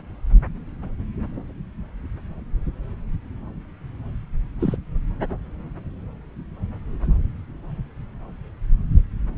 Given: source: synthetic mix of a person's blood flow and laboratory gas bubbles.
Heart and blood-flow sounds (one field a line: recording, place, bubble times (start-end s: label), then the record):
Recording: Doppler ultrasound of blood flow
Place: subclavian vein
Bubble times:
4.59-4.76 s: bubbles
From the record:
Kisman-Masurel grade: 112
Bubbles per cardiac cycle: 1 to 2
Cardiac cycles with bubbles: 1 to 10%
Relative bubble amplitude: moderate (0.250 to 0.450)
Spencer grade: 1 (occasional bubble signal discernible with the cardiac motion signal, with majority of cardiac periods free of bubbles)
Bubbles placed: anywhere in the cardiac cycle